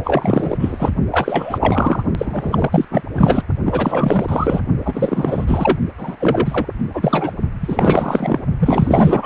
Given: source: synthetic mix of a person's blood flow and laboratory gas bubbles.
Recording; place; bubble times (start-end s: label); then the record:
Doppler ultrasound of blood flow; precordium
0.04-0.90 s: bubbles
1.11-2.03 s: bubbles
2.18-2.86 s: bubbles
2.91-3.02 s: bubbles
3.14-3.43 s: bubbles
3.65-4.60 s: bubbles
4.85-5.78 s: bubbles
5.97-6.16 s: bubbles
6.20-6.66 s: bubbles
6.94-7.32 s: bubbles
7.62-8.43 s: bubbles
8.59-9.26 s: bubbles
From the record:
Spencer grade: 4 (maximum detectable bubble signal sounding continuously throughout systole and diastole of every cardiac period, and overriding the amplitude of the normal cardiac signals); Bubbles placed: only in the low amplitude regions of the cardiac cycle